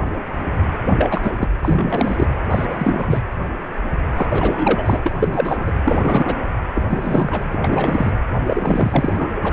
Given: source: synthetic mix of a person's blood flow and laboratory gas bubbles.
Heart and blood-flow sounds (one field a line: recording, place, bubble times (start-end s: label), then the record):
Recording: Doppler ultrasound of blood flow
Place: precordium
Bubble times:
0.86-1.31 s: bubbles
1.38-1.48 s: bubbles
1.62-2.26 s: bubbles
2.50-2.65 s: bubbles
2.70-3.21 s: bubbles
4.16-5.15 s: bubbles
5.19-5.72 s: bubbles
5.85-6.37 s: bubbles
6.75-6.85 s: bubbles
6.88-7.57 s: bubbles
7.64-8.12 s: bubbles
8.47-9.12 s: bubbles
9.17-9.29 s: bubbles
9.43-9.53 s: bubbles
From the record:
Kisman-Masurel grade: 333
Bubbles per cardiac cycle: rolling drumbeat, 9 or more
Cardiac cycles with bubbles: 50 to 99%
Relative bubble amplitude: loud (0.450 to 0.775)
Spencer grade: 3 (all of the cardiac periods contain showers or single bubble signals, but not dominating or overriding the cardiac motion signals)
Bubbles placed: anywhere in the cardiac cycle